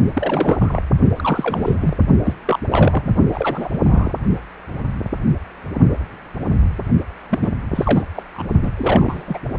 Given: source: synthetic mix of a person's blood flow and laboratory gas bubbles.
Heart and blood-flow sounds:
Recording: Doppler ultrasound of blood flow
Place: precordium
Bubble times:
0.13-0.82 s: bubbles
1.17-1.75 s: bubbles
1.81-1.96 s: bubbles
2.23-2.34 s: bubbles
2.45-2.59 s: bubbles
2.71-3.15 s: bubbles
3.33-3.69 s: bubbles
3.72-3.79 s: bubbles
3.87-4.12 s: bubbles
7.29-7.51 s: bubbles
7.71-8.03 s: bubbles
8.15-8.23 s: bubbles
8.34-8.45 s: bubbles
8.62-8.71 s: bubbles
8.77-9.39 s: bubbles
From the record:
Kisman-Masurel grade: 332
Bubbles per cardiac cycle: rolling drumbeat, 9 or more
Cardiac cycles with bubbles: 50 to 99%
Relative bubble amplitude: moderate (0.250 to 0.450)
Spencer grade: 3 (all of the cardiac periods contain showers or single bubble signals, but not dominating or overriding the cardiac motion signals)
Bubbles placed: only in the low amplitude regions of the cardiac cycle

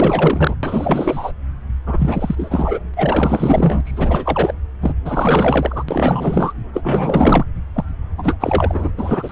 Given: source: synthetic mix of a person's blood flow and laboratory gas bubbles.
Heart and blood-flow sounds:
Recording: Doppler ultrasound of blood flow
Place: subclavian vein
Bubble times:
0.00-0.55 s: bubbles
0.63-1.32 s: bubbles
1.86-2.79 s: bubbles
2.96-3.81 s: bubbles
3.84-4.54 s: bubbles
4.81-4.93 s: bubbles
5.04-5.83 s: bubbles
5.88-6.53 s: bubbles
6.73-7.44 s: bubbles
7.74-7.84 s: bubbles
8.18-8.37 s: bubbles
8.40-8.91 s: bubbles
8.97-9.31 s: bubbles
From the record:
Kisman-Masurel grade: 444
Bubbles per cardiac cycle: continuous sound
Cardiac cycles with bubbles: 100%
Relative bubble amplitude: maximal (0.775 to 0.999)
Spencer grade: 4 (maximum detectable bubble signal sounding continuously throughout systole and diastole of every cardiac period, and overriding the amplitude of the normal cardiac signals)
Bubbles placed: anywhere in the cardiac cycle

